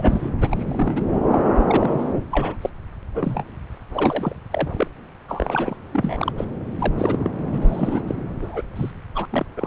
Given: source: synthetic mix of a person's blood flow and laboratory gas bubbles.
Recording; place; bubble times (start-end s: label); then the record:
Doppler ultrasound of blood flow; subclavian vein
0.00-0.30 s: bubbles
0.39-1.12 s: bubbles
1.30-1.42 s: bubbles
1.55-2.13 s: bubbles
2.32-2.55 s: bubbles
2.62-2.70 s: bubbles
3.14-3.44 s: bubbles
3.93-4.36 s: bubbles
4.51-4.87 s: bubbles
5.28-5.76 s: bubbles
5.92-6.33 s: bubbles
6.37-6.44 s: bubbles
6.79-6.93 s: bubbles
6.96-7.29 s: bubbles
7.52-8.01 s: bubbles
8.07-8.16 s: bubbles
8.42-8.62 s: bubbles
8.76-8.91 s: bubbles
9.15-9.26 s: bubbles
9.29-9.46 s: bubbles
9.56-9.67 s: bubbles
From the record:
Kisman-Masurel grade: 242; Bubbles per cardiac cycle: several, 3 to 8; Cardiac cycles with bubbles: 100%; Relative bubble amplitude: moderate (0.250 to 0.450); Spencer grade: 3 (all of the cardiac periods contain showers or single bubble signals, but not dominating or overriding the cardiac motion signals); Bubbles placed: anywhere in the cardiac cycle